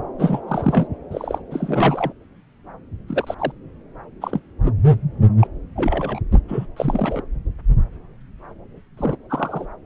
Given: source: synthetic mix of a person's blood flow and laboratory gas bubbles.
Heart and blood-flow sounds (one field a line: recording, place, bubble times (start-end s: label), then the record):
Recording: Doppler ultrasound of blood flow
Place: subclavian vein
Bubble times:
0.18-0.40 s: bubbles
0.47-0.87 s: bubbles
1.11-1.39 s: bubbles
1.50-2.12 s: bubbles
3.08-3.35 s: bubbles
3.38-3.52 s: bubbles
4.21-4.41 s: bubbles
4.66-4.72 s: bubbles
5.40-5.47 s: bubbles
5.76-6.20 s: bubbles
6.33-6.41 s: bubbles
6.48-6.66 s: bubbles
6.77-7.22 s: bubbles
8.97-9.16 s: bubbles
9.29-9.66 s: bubbles
From the record:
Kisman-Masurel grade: 232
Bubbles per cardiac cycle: several, 3 to 8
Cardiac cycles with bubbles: 50 to 99%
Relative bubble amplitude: moderate (0.250 to 0.450)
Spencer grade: 3 (all of the cardiac periods contain showers or single bubble signals, but not dominating or overriding the cardiac motion signals)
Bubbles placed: anywhere in the cardiac cycle